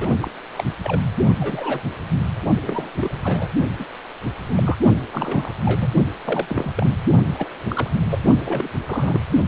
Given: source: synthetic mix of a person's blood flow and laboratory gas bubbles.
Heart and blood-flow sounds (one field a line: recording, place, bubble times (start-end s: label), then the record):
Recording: Doppler ultrasound of blood flow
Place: precordium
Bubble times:
0.00-0.11 s: bubbles
0.20-0.31 s: bubbles
0.56-0.64 s: bubbles
0.83-1.01 s: bubbles
1.40-1.81 s: bubbles
2.62-2.90 s: bubbles
2.96-3.19 s: bubbles
3.23-3.47 s: bubbles
3.79-3.87 s: bubbles
4.45-4.78 s: bubbles
5.11-5.51 s: bubbles
5.65-5.92 s: bubbles
6.25-6.71 s: bubbles
6.76-6.90 s: bubbles
7.33-7.49 s: bubbles
7.70-7.90 s: bubbles
8.10-8.18 s: bubbles
8.45-8.68 s: bubbles
8.86-9.19 s: bubbles
From the record:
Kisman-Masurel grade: 242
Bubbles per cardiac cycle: several, 3 to 8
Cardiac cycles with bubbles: 100%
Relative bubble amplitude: moderate (0.250 to 0.450)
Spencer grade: 3 (all of the cardiac periods contain showers or single bubble signals, but not dominating or overriding the cardiac motion signals)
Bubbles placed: only in the low amplitude regions of the cardiac cycle